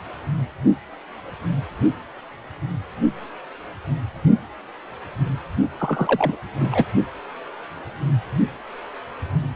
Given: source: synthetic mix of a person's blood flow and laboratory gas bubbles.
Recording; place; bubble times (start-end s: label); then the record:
Doppler ultrasound of blood flow; precordium
5.79-6.36 s: bubbles
6.61-6.84 s: bubbles
From the record:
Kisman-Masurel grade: 222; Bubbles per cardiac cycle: several, 3 to 8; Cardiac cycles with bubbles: 10 to 50%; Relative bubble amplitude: moderate (0.250 to 0.450); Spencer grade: 2 (many but less than half of the cardiac periods contain bubble signals, singularly or in groups); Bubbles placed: only in the low amplitude regions of the cardiac cycle